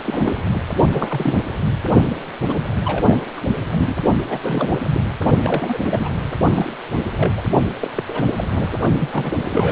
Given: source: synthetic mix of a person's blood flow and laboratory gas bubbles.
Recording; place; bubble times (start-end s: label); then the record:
Doppler ultrasound of blood flow; precordium
0.05-0.43 s: bubbles
0.52-0.63 s: bubbles
0.80-1.34 s: bubbles
2.10-2.15 s: bubbles
2.46-2.60 s: bubbles
2.85-3.26 s: bubbles
3.37-3.41 s: bubbles
3.72-3.94 s: bubbles
4.26-4.80 s: bubbles
4.84-5.00 s: bubbles
5.44-5.77 s: bubbles
5.84-6.09 s: bubbles
6.54-6.76 s: bubbles
6.93-7.02 s: bubbles
7.17-7.32 s: bubbles
7.35-7.43 s: bubbles
7.80-8.04 s: bubbles
8.08-8.23 s: bubbles
8.37-8.78 s: bubbles
8.99-9.09 s: bubbles
9.12-9.39 s: bubbles
9.49-9.72 s: bubbles
From the record:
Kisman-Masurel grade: 342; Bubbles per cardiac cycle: rolling drumbeat, 9 or more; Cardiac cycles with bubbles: 100%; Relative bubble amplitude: moderate (0.250 to 0.450); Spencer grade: 3 (all of the cardiac periods contain showers or single bubble signals, but not dominating or overriding the cardiac motion signals); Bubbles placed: only in the low amplitude regions of the cardiac cycle